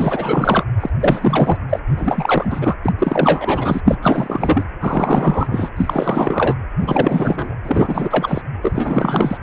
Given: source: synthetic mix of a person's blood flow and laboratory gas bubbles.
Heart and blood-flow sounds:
Doppler ultrasound of blood flow; precordium
0.00-0.65 s: bubbles
0.80-0.90 s: bubbles
1.00-1.58 s: bubbles
1.69-1.79 s: bubbles
1.87-2.76 s: bubbles
2.83-2.92 s: bubbles
2.98-3.80 s: bubbles
3.85-3.97 s: bubbles
4.03-4.64 s: bubbles
4.80-5.70 s: bubbles
5.76-6.56 s: bubbles
6.79-7.56 s: bubbles
7.63-8.41 s: bubbles
8.62-9.38 s: bubbles
From the record:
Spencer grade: 4 (maximum detectable bubble signal sounding continuously throughout systole and diastole of every cardiac period, and overriding the amplitude of the normal cardiac signals); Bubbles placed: anywhere in the cardiac cycle

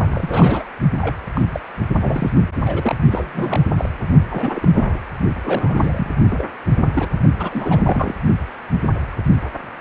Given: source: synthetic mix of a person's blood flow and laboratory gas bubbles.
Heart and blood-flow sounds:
Doppler ultrasound of blood flow; precordium
0.00-0.64 s: bubbles
1.01-1.16 s: bubbles
1.34-1.44 s: bubbles
1.52-1.60 s: bubbles
2.01-2.30 s: bubbles
2.65-2.95 s: bubbles
3.10-3.64 s: bubbles
3.77-3.89 s: bubbles
4.29-5.00 s: bubbles
5.44-6.11 s: bubbles
6.31-6.47 s: bubbles
6.94-7.08 s: bubbles
7.39-8.13 s: bubbles
From the record:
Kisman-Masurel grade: 232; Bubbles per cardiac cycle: several, 3 to 8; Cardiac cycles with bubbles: 50 to 99%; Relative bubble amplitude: moderate (0.250 to 0.450); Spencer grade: 3 (all of the cardiac periods contain showers or single bubble signals, but not dominating or overriding the cardiac motion signals); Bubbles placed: only in the low amplitude regions of the cardiac cycle

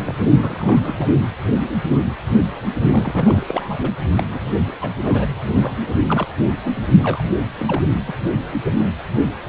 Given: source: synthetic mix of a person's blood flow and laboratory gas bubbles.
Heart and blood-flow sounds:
Doppler ultrasound of blood flow; precordium
0.07-0.14 s: bubbles
0.37-1.07 s: bubbles
2.91-3.90 s: bubbles
4.18-4.24 s: bubbles
4.30-4.39 s: bubbles
4.58-4.72 s: bubbles
4.80-4.91 s: bubbles
5.01-5.40 s: bubbles
5.55-5.87 s: bubbles
6.08-6.27 s: bubbles
6.50-6.82 s: bubbles
7.00-7.24 s: bubbles
7.58-7.82 s: bubbles
8.06-8.14 s: bubbles
From the record:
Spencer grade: 3 (all of the cardiac periods contain showers or single bubble signals, but not dominating or overriding the cardiac motion signals); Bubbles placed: anywhere in the cardiac cycle

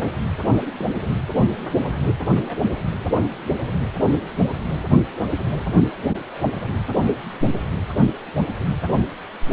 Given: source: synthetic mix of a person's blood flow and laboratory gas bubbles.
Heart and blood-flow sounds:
Doppler ultrasound of blood flow; precordium
0.78-0.86 s: bubbles
1.05-1.09 s: bubbles
2.33-2.60 s: bubbles
6.11-6.18 s: bubbles
6.42-6.51 s: bubbles
From the record:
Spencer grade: 2 (many but less than half of the cardiac periods contain bubble signals, singularly or in groups); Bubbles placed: anywhere in the cardiac cycle

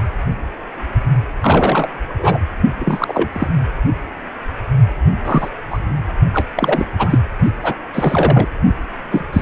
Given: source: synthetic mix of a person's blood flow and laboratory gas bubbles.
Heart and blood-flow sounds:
Doppler ultrasound of blood flow; precordium
1.41-1.89 s: bubbles
2.08-2.40 s: bubbles
2.78-3.29 s: bubbles
3.32-3.48 s: bubbles
5.25-5.50 s: bubbles
5.70-5.79 s: bubbles
6.33-6.46 s: bubbles
6.56-6.85 s: bubbles
6.97-7.18 s: bubbles
7.45-7.51 s: bubbles
7.62-7.74 s: bubbles
7.93-8.48 s: bubbles
9.12-9.25 s: bubbles
9.33-9.42 s: bubbles
From the record:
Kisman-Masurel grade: 233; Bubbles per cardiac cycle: several, 3 to 8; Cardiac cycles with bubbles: 50 to 99%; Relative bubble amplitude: loud (0.450 to 0.775); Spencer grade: 3 (all of the cardiac periods contain showers or single bubble signals, but not dominating or overriding the cardiac motion signals); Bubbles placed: anywhere in the cardiac cycle

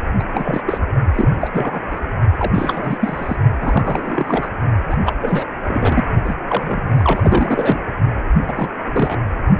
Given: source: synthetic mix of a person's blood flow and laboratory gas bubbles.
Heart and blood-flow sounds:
Doppler ultrasound of blood flow; precordium
0.19-0.23 s: bubbles
0.33-0.61 s: bubbles
0.66-0.78 s: bubbles
1.15-1.28 s: bubbles
1.41-1.50 s: bubbles
1.53-1.83 s: bubbles
1.91-1.99 s: bubbles
2.38-2.98 s: bubbles
3.00-3.37 s: bubbles
3.54-4.49 s: bubbles
4.90-4.97 s: bubbles
5.05-5.12 s: bubbles
5.21-5.45 s: bubbles
5.68-6.04 s: bubbles
6.24-6.36 s: bubbles
6.47-6.88 s: bubbles
6.98-7.81 s: bubbles
8.47-8.70 s: bubbles
8.92-9.19 s: bubbles
From the record:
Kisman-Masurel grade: 342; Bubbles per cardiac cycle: rolling drumbeat, 9 or more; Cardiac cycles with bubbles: 100%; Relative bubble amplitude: moderate (0.250 to 0.450); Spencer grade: 3 (all of the cardiac periods contain showers or single bubble signals, but not dominating or overriding the cardiac motion signals); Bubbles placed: only in the low amplitude regions of the cardiac cycle

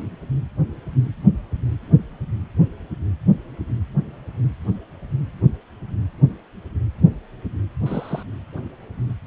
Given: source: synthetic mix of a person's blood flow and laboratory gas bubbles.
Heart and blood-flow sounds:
Doppler ultrasound of blood flow; precordium
7.86-8.23 s: bubbles
From the record:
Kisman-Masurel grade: 121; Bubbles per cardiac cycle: 1 to 2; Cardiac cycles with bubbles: 10 to 50%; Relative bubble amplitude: barely perceptible (0.100 to 0.250); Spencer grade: 2 (many but less than half of the cardiac periods contain bubble signals, singularly or in groups); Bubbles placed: anywhere in the cardiac cycle

